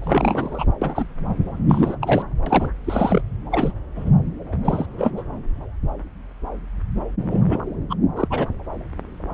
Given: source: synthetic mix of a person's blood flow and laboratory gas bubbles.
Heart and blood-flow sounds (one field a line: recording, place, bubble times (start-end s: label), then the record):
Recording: Doppler ultrasound of blood flow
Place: subclavian vein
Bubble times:
0.01-0.65 s: bubbles
0.81-1.14 s: bubbles
1.69-1.96 s: bubbles
2.01-2.23 s: bubbles
2.46-2.70 s: bubbles
2.84-3.21 s: bubbles
3.51-3.71 s: bubbles
3.96-4.13 s: bubbles
4.51-4.56 s: bubbles
4.65-4.86 s: bubbles
4.98-5.11 s: bubbles
5.17-5.22 s: bubbles
7.30-7.40 s: bubbles
7.47-7.58 s: bubbles
7.89-7.95 s: bubbles
8.16-8.28 s: bubbles
8.30-8.46 s: bubbles
From the record:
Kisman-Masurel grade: 232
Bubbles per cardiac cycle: several, 3 to 8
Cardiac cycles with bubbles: 50 to 99%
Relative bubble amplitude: moderate (0.250 to 0.450)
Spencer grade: 3 (all of the cardiac periods contain showers or single bubble signals, but not dominating or overriding the cardiac motion signals)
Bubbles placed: anywhere in the cardiac cycle